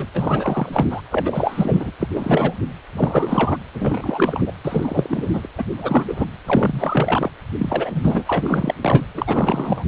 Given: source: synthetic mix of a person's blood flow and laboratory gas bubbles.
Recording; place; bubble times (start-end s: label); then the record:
Doppler ultrasound of blood flow; precordium
0.00-0.06 s: bubbles
0.14-0.70 s: bubbles
0.73-1.01 s: bubbles
1.11-1.91 s: bubbles
2.00-2.07 s: bubbles
2.15-2.54 s: bubbles
2.92-3.57 s: bubbles
3.73-4.52 s: bubbles
4.64-5.48 s: bubbles
5.57-5.64 s: bubbles
5.77-6.26 s: bubbles
6.46-7.32 s: bubbles
7.58-8.24 s: bubbles
8.27-8.74 s: bubbles
8.82-9.05 s: bubbles
9.14-9.84 s: bubbles
From the record:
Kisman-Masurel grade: 333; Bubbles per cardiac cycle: rolling drumbeat, 9 or more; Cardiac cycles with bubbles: 50 to 99%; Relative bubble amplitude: loud (0.450 to 0.775); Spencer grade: 3 (all of the cardiac periods contain showers or single bubble signals, but not dominating or overriding the cardiac motion signals); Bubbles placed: anywhere in the cardiac cycle